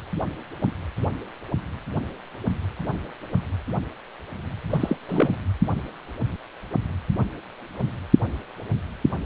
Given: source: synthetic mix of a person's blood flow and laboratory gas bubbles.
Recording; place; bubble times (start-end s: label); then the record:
Doppler ultrasound of blood flow; precordium
4.70-4.96 s: bubbles
5.08-5.34 s: bubbles
From the record:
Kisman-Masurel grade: 212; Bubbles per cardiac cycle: several, 3 to 8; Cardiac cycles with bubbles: 1 to 10%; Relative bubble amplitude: moderate (0.250 to 0.450); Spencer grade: 1 (occasional bubble signal discernible with the cardiac motion signal, with majority of cardiac periods free of bubbles); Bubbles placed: anywhere in the cardiac cycle